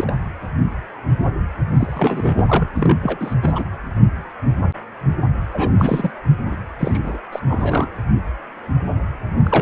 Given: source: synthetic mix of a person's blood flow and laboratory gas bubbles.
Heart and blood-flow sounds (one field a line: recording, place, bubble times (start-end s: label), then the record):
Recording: Doppler ultrasound of blood flow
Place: precordium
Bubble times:
0.00-0.13 s: bubbles
1.76-2.44 s: bubbles
2.48-2.69 s: bubbles
2.75-2.97 s: bubbles
3.02-3.34 s: bubbles
3.42-3.65 s: bubbles
5.53-5.72 s: bubbles
5.78-6.11 s: bubbles
6.46-6.55 s: bubbles
6.79-7.00 s: bubbles
7.03-7.18 s: bubbles
7.32-7.40 s: bubbles
7.46-7.88 s: bubbles
9.43-9.61 s: bubbles
From the record:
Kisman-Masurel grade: 332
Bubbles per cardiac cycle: rolling drumbeat, 9 or more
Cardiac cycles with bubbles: 50 to 99%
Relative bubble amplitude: moderate (0.250 to 0.450)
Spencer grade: 3 (all of the cardiac periods contain showers or single bubble signals, but not dominating or overriding the cardiac motion signals)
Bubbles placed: anywhere in the cardiac cycle